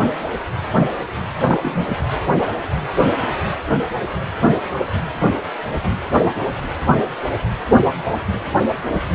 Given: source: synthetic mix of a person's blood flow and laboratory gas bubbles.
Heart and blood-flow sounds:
Doppler ultrasound of blood flow; precordium
1.48-1.86 s: bubbles
1.89-1.96 s: bubbles
From the record:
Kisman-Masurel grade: 112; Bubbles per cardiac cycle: 1 to 2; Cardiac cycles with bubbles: 1 to 10%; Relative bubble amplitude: moderate (0.250 to 0.450); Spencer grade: 1 (occasional bubble signal discernible with the cardiac motion signal, with majority of cardiac periods free of bubbles); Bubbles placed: anywhere in the cardiac cycle

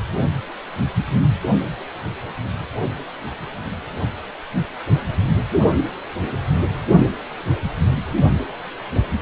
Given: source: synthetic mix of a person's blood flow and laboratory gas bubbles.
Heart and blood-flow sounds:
Doppler ultrasound of blood flow; precordium
no bubbles
From the record:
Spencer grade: 0 (complete lack of bubble signals)

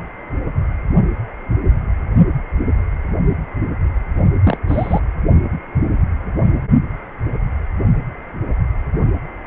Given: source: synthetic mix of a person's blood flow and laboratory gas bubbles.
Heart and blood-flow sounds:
Doppler ultrasound of blood flow; precordium
4.44-4.58 s: bubbles
4.68-5.00 s: bubbles
From the record:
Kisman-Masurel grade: 112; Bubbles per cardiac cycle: 1 to 2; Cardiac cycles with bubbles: 1 to 10%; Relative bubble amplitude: moderate (0.250 to 0.450); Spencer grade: 1 (occasional bubble signal discernible with the cardiac motion signal, with majority of cardiac periods free of bubbles); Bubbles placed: only in the low amplitude regions of the cardiac cycle

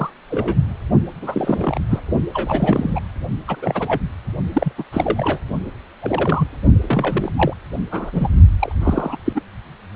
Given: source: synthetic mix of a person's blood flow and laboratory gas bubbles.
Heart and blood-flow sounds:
Doppler ultrasound of blood flow; precordium
0.00-0.10 s: bubbles
0.30-0.57 s: bubbles
1.22-1.79 s: bubbles
1.90-2.00 s: bubbles
2.33-3.00 s: bubbles
3.48-4.03 s: bubbles
4.53-4.72 s: bubbles
4.78-4.83 s: bubbles
4.92-5.39 s: bubbles
6.01-6.48 s: bubbles
6.82-7.32 s: bubbles
7.36-7.54 s: bubbles
7.91-8.28 s: bubbles
8.60-8.72 s: bubbles
8.80-9.17 s: bubbles
9.25-9.41 s: bubbles
From the record:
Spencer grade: 3 (all of the cardiac periods contain showers or single bubble signals, but not dominating or overriding the cardiac motion signals); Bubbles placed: only in the low amplitude regions of the cardiac cycle

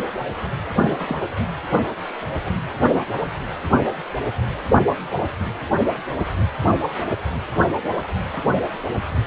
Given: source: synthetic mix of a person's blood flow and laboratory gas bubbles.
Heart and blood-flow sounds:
Doppler ultrasound of blood flow; precordium
0.82-1.17 s: bubbles
From the record:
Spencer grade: 1 (occasional bubble signal discernible with the cardiac motion signal, with majority of cardiac periods free of bubbles); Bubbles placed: anywhere in the cardiac cycle

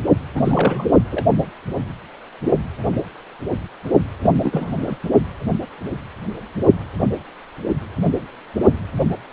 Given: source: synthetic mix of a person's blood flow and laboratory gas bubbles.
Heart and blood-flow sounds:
Doppler ultrasound of blood flow; precordium
0.35-0.86 s: bubbles
1.10-1.25 s: bubbles
4.22-4.34 s: bubbles
4.43-4.97 s: bubbles
From the record:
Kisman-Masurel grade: 222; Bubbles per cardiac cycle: several, 3 to 8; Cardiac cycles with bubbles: 10 to 50%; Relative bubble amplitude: moderate (0.250 to 0.450); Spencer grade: 2 (many but less than half of the cardiac periods contain bubble signals, singularly or in groups); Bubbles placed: anywhere in the cardiac cycle

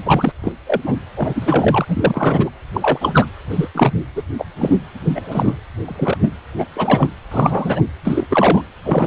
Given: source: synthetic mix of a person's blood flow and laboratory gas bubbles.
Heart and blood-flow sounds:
Doppler ultrasound of blood flow; precordium
0.05-0.32 s: bubbles
0.43-0.52 s: bubbles
0.67-0.81 s: bubbles
0.83-0.95 s: bubbles
1.16-2.50 s: bubbles
2.73-3.27 s: bubbles
3.49-3.68 s: bubbles
3.74-3.92 s: bubbles
4.15-4.22 s: bubbles
4.38-4.45 s: bubbles
4.59-4.75 s: bubbles
5.05-5.60 s: bubbles
5.84-6.17 s: bubbles
6.21-6.33 s: bubbles
6.58-6.66 s: bubbles
6.73-7.09 s: bubbles
7.31-7.82 s: bubbles
8.04-8.25 s: bubbles
8.30-8.62 s: bubbles
8.82-9.07 s: bubbles
From the record:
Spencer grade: 3 (all of the cardiac periods contain showers or single bubble signals, but not dominating or overriding the cardiac motion signals); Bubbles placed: anywhere in the cardiac cycle

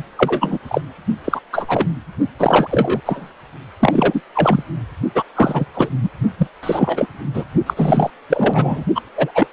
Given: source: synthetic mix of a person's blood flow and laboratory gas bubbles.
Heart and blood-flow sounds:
Doppler ultrasound of blood flow; precordium
0.17-0.58 s: bubbles
0.67-0.81 s: bubbles
1.24-1.41 s: bubbles
1.52-1.87 s: bubbles
2.39-2.68 s: bubbles
2.71-3.01 s: bubbles
3.05-3.32 s: bubbles
3.80-4.21 s: bubbles
4.34-4.63 s: bubbles
5.15-5.24 s: bubbles
5.35-5.66 s: bubbles
5.74-5.89 s: bubbles
6.02-6.09 s: bubbles
6.38-6.48 s: bubbles
6.62-7.06 s: bubbles
7.33-7.44 s: bubbles
7.66-8.10 s: bubbles
8.29-8.84 s: bubbles
8.94-9.01 s: bubbles
9.15-9.32 s: bubbles
9.34-9.46 s: bubbles
From the record:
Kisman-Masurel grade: 343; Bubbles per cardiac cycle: rolling drumbeat, 9 or more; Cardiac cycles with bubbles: 100%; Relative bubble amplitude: loud (0.450 to 0.775); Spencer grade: 3 (all of the cardiac periods contain showers or single bubble signals, but not dominating or overriding the cardiac motion signals); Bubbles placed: only in the low amplitude regions of the cardiac cycle

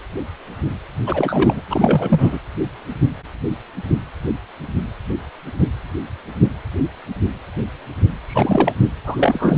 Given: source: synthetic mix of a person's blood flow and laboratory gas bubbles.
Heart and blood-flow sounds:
Doppler ultrasound of blood flow; precordium
1.06-1.62 s: bubbles
1.68-2.39 s: bubbles
8.26-8.73 s: bubbles
9.04-9.58 s: bubbles
From the record:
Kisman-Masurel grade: 223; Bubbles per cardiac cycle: several, 3 to 8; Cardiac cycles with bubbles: 10 to 50%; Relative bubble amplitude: loud (0.450 to 0.775); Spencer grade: 2 (many but less than half of the cardiac periods contain bubble signals, singularly or in groups); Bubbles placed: anywhere in the cardiac cycle

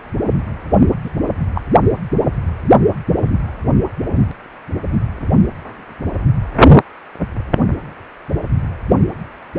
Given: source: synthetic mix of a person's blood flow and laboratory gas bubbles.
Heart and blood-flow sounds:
Doppler ultrasound of blood flow; precordium
1.04-1.10 s: bubbles
1.54-1.61 s: bubbles
From the record:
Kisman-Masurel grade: 122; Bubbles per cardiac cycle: 1 to 2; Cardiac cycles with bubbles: 10 to 50%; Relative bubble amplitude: moderate (0.250 to 0.450); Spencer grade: 2 (many but less than half of the cardiac periods contain bubble signals, singularly or in groups); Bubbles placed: only in the low amplitude regions of the cardiac cycle

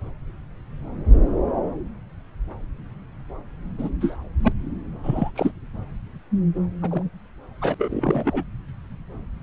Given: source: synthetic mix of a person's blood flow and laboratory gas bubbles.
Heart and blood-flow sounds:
Doppler ultrasound of blood flow; subclavian vein
3.78-3.90 s: bubbles
4.00-4.16 s: bubbles
4.42-4.53 s: bubbles
5.04-5.30 s: bubbles
5.35-5.51 s: bubbles
6.82-7.03 s: bubbles
7.61-7.75 s: bubbles
7.78-8.44 s: bubbles
From the record:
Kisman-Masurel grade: 222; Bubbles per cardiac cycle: several, 3 to 8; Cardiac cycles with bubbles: 10 to 50%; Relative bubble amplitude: moderate (0.250 to 0.450); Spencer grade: 2 (many but less than half of the cardiac periods contain bubble signals, singularly or in groups); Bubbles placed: anywhere in the cardiac cycle

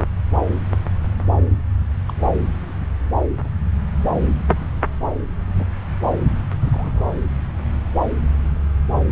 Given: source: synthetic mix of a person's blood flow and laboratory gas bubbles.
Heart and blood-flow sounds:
Doppler ultrasound of blood flow; subclavian vein
2.08-2.13 s: bubbles
3.44-3.48 s: bubbles
5.56-5.66 s: bubbles
6.62-7.04 s: bubbles
From the record:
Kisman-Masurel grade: 121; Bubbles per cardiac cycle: 1 to 2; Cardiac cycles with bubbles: 10 to 50%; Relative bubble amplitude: barely perceptible (0.100 to 0.250); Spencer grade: 2 (many but less than half of the cardiac periods contain bubble signals, singularly or in groups); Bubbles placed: anywhere in the cardiac cycle

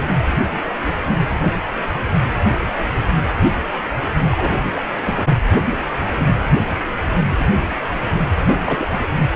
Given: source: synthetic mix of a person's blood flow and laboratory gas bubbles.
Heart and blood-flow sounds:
Doppler ultrasound of blood flow; precordium
4.31-4.51 s: bubbles
4.63-4.71 s: bubbles
4.75-4.81 s: bubbles
5.04-5.37 s: bubbles
8.46-8.96 s: bubbles
From the record:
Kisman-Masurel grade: 222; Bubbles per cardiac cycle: several, 3 to 8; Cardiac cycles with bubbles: 10 to 50%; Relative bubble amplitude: moderate (0.250 to 0.450); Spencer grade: 2 (many but less than half of the cardiac periods contain bubble signals, singularly or in groups); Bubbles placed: anywhere in the cardiac cycle

